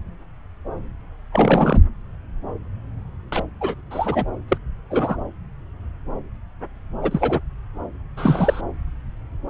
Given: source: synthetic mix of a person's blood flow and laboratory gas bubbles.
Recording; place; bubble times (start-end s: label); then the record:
Doppler ultrasound of blood flow; subclavian vein
1.32-1.78 s: bubbles
3.32-3.43 s: bubbles
3.61-3.75 s: bubbles
3.90-4.25 s: bubbles
4.48-4.58 s: bubbles
4.90-5.17 s: bubbles
7.02-7.40 s: bubbles
8.17-8.62 s: bubbles
From the record:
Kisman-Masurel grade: 222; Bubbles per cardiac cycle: several, 3 to 8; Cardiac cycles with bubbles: 10 to 50%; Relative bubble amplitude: moderate (0.250 to 0.450); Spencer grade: 2 (many but less than half of the cardiac periods contain bubble signals, singularly or in groups); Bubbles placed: anywhere in the cardiac cycle